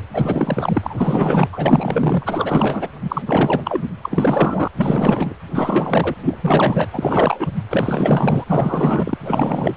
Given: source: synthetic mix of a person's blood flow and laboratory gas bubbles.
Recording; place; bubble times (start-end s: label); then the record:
Doppler ultrasound of blood flow; precordium
0.12-1.49 s: bubbles
1.52-2.89 s: bubbles
3.02-3.22 s: bubbles
3.25-3.84 s: bubbles
4.02-4.68 s: bubbles
4.77-5.33 s: bubbles
5.54-6.15 s: bubbles
6.21-6.38 s: bubbles
6.42-6.87 s: bubbles
6.93-7.48 s: bubbles
7.70-8.44 s: bubbles
8.46-9.18 s: bubbles
9.23-9.75 s: bubbles
From the record:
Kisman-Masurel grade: 444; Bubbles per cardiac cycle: continuous sound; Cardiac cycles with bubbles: 100%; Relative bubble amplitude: maximal (0.775 to 0.999); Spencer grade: 4 (maximum detectable bubble signal sounding continuously throughout systole and diastole of every cardiac period, and overriding the amplitude of the normal cardiac signals); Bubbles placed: anywhere in the cardiac cycle